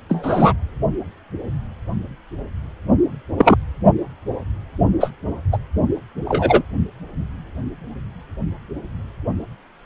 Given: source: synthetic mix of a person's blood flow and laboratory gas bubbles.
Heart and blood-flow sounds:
Doppler ultrasound of blood flow; precordium
0.09-0.53 s: bubbles
3.38-3.56 s: bubbles
5.00-5.10 s: bubbles
5.51-5.58 s: bubbles
6.25-6.62 s: bubbles
From the record:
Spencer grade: 2 (many but less than half of the cardiac periods contain bubble signals, singularly or in groups); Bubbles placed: only in the low amplitude regions of the cardiac cycle

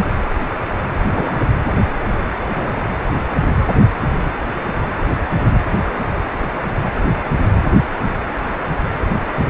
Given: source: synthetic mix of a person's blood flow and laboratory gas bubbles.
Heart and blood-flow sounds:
Doppler ultrasound of blood flow; precordium
1.08-1.39 s: bubbles
1.68-1.75 s: bubbles
2.55-2.78 s: bubbles
3.60-3.67 s: bubbles
9.34-9.45 s: bubbles
From the record:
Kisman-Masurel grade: 122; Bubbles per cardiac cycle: 1 to 2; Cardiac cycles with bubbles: 10 to 50%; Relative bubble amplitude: moderate (0.250 to 0.450); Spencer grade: 2 (many but less than half of the cardiac periods contain bubble signals, singularly or in groups); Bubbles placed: anywhere in the cardiac cycle

